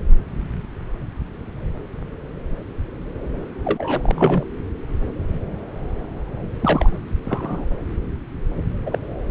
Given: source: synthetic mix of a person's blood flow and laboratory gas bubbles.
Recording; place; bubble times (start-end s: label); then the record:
Doppler ultrasound of blood flow; subclavian vein
3.65-4.44 s: bubbles
6.59-7.00 s: bubbles
7.25-7.66 s: bubbles
8.85-8.98 s: bubbles
From the record:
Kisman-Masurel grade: 222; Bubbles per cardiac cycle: several, 3 to 8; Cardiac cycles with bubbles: 10 to 50%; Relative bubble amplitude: moderate (0.250 to 0.450); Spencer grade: 2 (many but less than half of the cardiac periods contain bubble signals, singularly or in groups); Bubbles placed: anywhere in the cardiac cycle